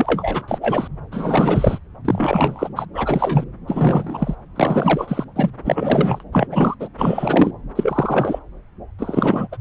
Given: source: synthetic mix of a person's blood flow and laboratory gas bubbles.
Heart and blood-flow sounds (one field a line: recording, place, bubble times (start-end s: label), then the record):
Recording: Doppler ultrasound of blood flow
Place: subclavian vein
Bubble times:
0.00-0.58 s: bubbles
0.61-0.88 s: bubbles
1.11-1.79 s: bubbles
2.04-2.69 s: bubbles
2.75-2.86 s: bubbles
2.93-3.44 s: bubbles
3.67-4.35 s: bubbles
4.55-5.25 s: bubbles
5.36-5.51 s: bubbles
5.64-6.24 s: bubbles
6.32-6.47 s: bubbles
6.50-6.75 s: bubbles
6.79-6.89 s: bubbles
6.98-7.51 s: bubbles
7.75-8.39 s: bubbles
8.98-9.47 s: bubbles
9.51-9.57 s: bubbles
From the record:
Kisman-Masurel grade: 343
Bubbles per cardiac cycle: rolling drumbeat, 9 or more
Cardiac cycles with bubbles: 100%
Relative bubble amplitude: loud (0.450 to 0.775)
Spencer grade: 3 (all of the cardiac periods contain showers or single bubble signals, but not dominating or overriding the cardiac motion signals)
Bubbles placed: anywhere in the cardiac cycle